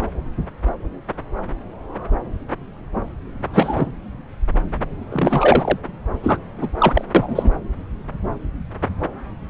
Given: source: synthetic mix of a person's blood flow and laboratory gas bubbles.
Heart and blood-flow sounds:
Doppler ultrasound of blood flow; subclavian vein
3.53-3.91 s: bubbles
5.09-5.78 s: bubbles
6.23-6.38 s: bubbles
6.58-6.67 s: bubbles
6.78-7.04 s: bubbles
7.14-7.50 s: bubbles
From the record:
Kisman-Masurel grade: 223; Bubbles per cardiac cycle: several, 3 to 8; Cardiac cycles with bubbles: 10 to 50%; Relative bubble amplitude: loud (0.450 to 0.775); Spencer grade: 2 (many but less than half of the cardiac periods contain bubble signals, singularly or in groups); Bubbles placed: anywhere in the cardiac cycle

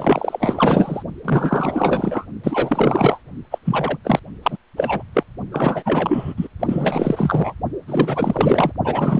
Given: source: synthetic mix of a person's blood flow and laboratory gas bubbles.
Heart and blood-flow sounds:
Doppler ultrasound of blood flow; precordium
0.00-1.02 s: bubbles
1.25-2.26 s: bubbles
2.44-3.19 s: bubbles
3.51-3.58 s: bubbles
3.65-3.98 s: bubbles
4.03-4.19 s: bubbles
4.42-4.57 s: bubbles
4.76-5.02 s: bubbles
5.14-5.23 s: bubbles
5.52-6.34 s: bubbles
6.36-6.48 s: bubbles
6.59-7.54 s: bubbles
7.87-8.73 s: bubbles
8.84-9.20 s: bubbles
From the record:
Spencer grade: 4 (maximum detectable bubble signal sounding continuously throughout systole and diastole of every cardiac period, and overriding the amplitude of the normal cardiac signals); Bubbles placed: only in the low amplitude regions of the cardiac cycle

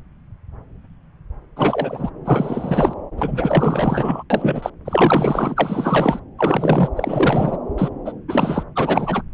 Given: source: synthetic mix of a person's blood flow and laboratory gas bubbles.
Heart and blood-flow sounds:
Doppler ultrasound of blood flow; subclavian vein
1.56-2.10 s: bubbles
2.25-2.94 s: bubbles
3.18-4.23 s: bubbles
4.30-4.70 s: bubbles
4.85-6.19 s: bubbles
6.38-6.89 s: bubbles
6.95-7.57 s: bubbles
7.77-7.89 s: bubbles
8.05-8.12 s: bubbles
8.28-8.63 s: bubbles
8.76-9.22 s: bubbles
From the record:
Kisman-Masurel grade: 333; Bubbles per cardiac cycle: rolling drumbeat, 9 or more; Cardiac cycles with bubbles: 50 to 99%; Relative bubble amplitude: loud (0.450 to 0.775); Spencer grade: 3 (all of the cardiac periods contain showers or single bubble signals, but not dominating or overriding the cardiac motion signals); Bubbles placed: anywhere in the cardiac cycle

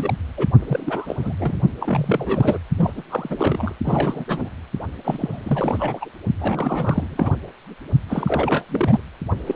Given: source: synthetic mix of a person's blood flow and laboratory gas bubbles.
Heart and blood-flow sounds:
Doppler ultrasound of blood flow; precordium
0.00-0.14 s: bubbles
0.37-0.47 s: bubbles
0.60-1.59 s: bubbles
1.80-2.58 s: bubbles
2.77-2.94 s: bubbles
2.96-3.03 s: bubbles
3.10-3.75 s: bubbles
3.83-4.25 s: bubbles
4.28-4.49 s: bubbles
5.04-6.10 s: bubbles
6.40-7.31 s: bubbles
8.08-8.64 s: bubbles
8.68-9.00 s: bubbles
9.46-9.56 s: bubbles
From the record:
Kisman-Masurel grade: 342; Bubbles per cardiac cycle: rolling drumbeat, 9 or more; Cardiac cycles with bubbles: 100%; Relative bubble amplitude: moderate (0.250 to 0.450); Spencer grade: 3 (all of the cardiac periods contain showers or single bubble signals, but not dominating or overriding the cardiac motion signals); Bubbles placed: only in the low amplitude regions of the cardiac cycle

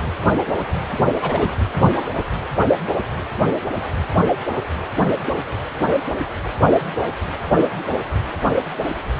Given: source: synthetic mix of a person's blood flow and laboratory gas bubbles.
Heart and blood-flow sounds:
Doppler ultrasound of blood flow; precordium
1.21-1.59 s: bubbles
From the record:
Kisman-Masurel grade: 112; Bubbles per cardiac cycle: 1 to 2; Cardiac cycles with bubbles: 1 to 10%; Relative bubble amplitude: moderate (0.250 to 0.450); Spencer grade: 1 (occasional bubble signal discernible with the cardiac motion signal, with majority of cardiac periods free of bubbles); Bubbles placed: anywhere in the cardiac cycle

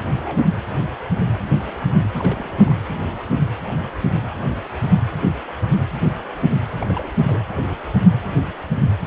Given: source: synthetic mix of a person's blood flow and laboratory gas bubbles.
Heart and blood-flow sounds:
Doppler ultrasound of blood flow; precordium
0.03-0.46 s: bubbles
1.58-2.08 s: bubbles
2.15-2.77 s: bubbles
6.78-7.09 s: bubbles
7.20-7.42 s: bubbles
From the record:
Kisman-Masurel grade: 221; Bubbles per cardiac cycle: several, 3 to 8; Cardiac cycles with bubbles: 10 to 50%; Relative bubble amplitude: barely perceptible (0.100 to 0.250); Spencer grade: 2 (many but less than half of the cardiac periods contain bubble signals, singularly or in groups); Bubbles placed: anywhere in the cardiac cycle

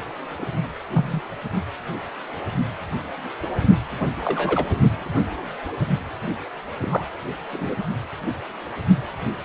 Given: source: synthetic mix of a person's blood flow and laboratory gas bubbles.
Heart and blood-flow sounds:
Doppler ultrasound of blood flow; precordium
0.38-0.46 s: bubbles
0.92-1.23 s: bubbles
4.00-4.05 s: bubbles
4.23-4.66 s: bubbles
6.81-7.04 s: bubbles
7.53-7.75 s: bubbles
From the record:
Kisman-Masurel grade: 122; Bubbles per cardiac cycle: 1 to 2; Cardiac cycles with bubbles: 10 to 50%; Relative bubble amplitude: moderate (0.250 to 0.450); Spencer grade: 2 (many but less than half of the cardiac periods contain bubble signals, singularly or in groups); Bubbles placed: only in the low amplitude regions of the cardiac cycle

